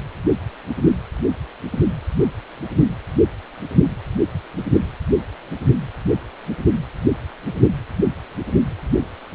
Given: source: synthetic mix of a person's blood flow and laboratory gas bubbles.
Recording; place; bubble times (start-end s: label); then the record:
Doppler ultrasound of blood flow; precordium
no bubbles
From the record:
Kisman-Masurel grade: 000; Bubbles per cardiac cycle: 0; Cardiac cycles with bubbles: 0%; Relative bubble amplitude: no bubbles discernible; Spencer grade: 0 (complete lack of bubble signals)